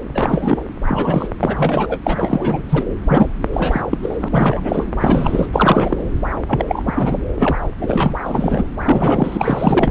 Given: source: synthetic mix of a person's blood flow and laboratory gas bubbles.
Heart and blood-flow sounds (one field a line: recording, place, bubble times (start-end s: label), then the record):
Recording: Doppler ultrasound of blood flow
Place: subclavian vein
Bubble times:
0.14-0.64 s: bubbles
0.86-1.28 s: bubbles
1.39-1.99 s: bubbles
2.04-2.62 s: bubbles
2.69-2.84 s: bubbles
3.07-3.29 s: bubbles
3.53-3.82 s: bubbles
3.91-3.98 s: bubbles
4.02-4.87 s: bubbles
4.98-5.47 s: bubbles
5.53-6.08 s: bubbles
6.49-6.66 s: bubbles
6.68-6.83 s: bubbles
6.86-7.21 s: bubbles
7.35-7.57 s: bubbles
7.81-8.21 s: bubbles
8.26-8.63 s: bubbles
8.82-9.91 s: bubbles
From the record:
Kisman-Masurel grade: 343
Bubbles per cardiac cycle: rolling drumbeat, 9 or more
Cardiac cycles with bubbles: 100%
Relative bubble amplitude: loud (0.450 to 0.775)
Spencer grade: 3 (all of the cardiac periods contain showers or single bubble signals, but not dominating or overriding the cardiac motion signals)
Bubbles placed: anywhere in the cardiac cycle